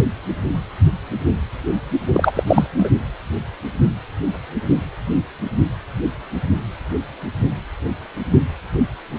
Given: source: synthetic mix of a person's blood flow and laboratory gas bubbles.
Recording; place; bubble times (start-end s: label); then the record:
Doppler ultrasound of blood flow; precordium
2.14-2.31 s: bubbles
2.34-2.43 s: bubbles
2.47-2.67 s: bubbles
2.77-2.89 s: bubbles
From the record:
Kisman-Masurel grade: 213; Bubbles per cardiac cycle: several, 3 to 8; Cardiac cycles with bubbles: 1 to 10%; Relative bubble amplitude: loud (0.450 to 0.775); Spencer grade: 1 (occasional bubble signal discernible with the cardiac motion signal, with majority of cardiac periods free of bubbles); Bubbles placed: only in the low amplitude regions of the cardiac cycle